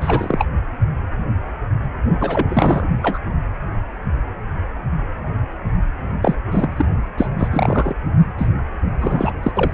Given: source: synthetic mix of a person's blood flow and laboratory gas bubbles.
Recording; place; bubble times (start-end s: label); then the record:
Doppler ultrasound of blood flow; precordium
0.00-0.46 s: bubbles
2.20-2.89 s: bubbles
3.02-3.19 s: bubbles
6.22-6.36 s: bubbles
6.50-6.86 s: bubbles
7.17-7.29 s: bubbles
7.38-7.48 s: bubbles
7.51-7.95 s: bubbles
8.38-8.50 s: bubbles
9.00-9.33 s: bubbles
9.43-9.51 s: bubbles
9.55-9.71 s: bubbles
From the record:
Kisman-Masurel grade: 333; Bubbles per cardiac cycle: rolling drumbeat, 9 or more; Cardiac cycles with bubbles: 50 to 99%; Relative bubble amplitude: loud (0.450 to 0.775); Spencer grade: 3 (all of the cardiac periods contain showers or single bubble signals, but not dominating or overriding the cardiac motion signals); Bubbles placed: only in the low amplitude regions of the cardiac cycle